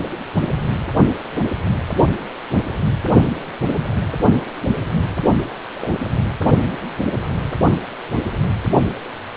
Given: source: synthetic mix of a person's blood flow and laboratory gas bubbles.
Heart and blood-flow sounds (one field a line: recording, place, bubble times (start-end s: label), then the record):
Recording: Doppler ultrasound of blood flow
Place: precordium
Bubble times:
5.74-5.89 s: bubbles
From the record:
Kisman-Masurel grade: 112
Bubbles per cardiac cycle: 1 to 2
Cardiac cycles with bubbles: 1 to 10%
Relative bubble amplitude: moderate (0.250 to 0.450)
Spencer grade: 1 (occasional bubble signal discernible with the cardiac motion signal, with majority of cardiac periods free of bubbles)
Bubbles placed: only in the low amplitude regions of the cardiac cycle